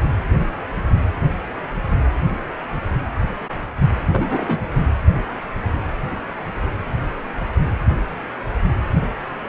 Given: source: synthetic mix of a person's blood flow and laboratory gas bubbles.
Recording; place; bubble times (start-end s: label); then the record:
Doppler ultrasound of blood flow; precordium
4.12-4.62 s: bubbles
From the record:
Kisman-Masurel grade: 112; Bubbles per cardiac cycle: 1 to 2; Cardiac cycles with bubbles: 1 to 10%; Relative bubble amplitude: moderate (0.250 to 0.450); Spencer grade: 1 (occasional bubble signal discernible with the cardiac motion signal, with majority of cardiac periods free of bubbles); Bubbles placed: anywhere in the cardiac cycle